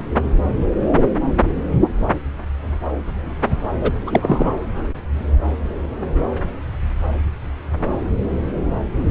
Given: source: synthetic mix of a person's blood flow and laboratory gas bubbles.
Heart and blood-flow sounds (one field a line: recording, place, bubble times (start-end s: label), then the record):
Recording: Doppler ultrasound of blood flow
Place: subclavian vein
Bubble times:
3.81-3.91 s: bubbles
4.07-4.54 s: bubbles
From the record:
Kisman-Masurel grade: 213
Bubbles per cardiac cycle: several, 3 to 8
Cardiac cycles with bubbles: 1 to 10%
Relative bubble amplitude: loud (0.450 to 0.775)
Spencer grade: 1 (occasional bubble signal discernible with the cardiac motion signal, with majority of cardiac periods free of bubbles)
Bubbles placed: anywhere in the cardiac cycle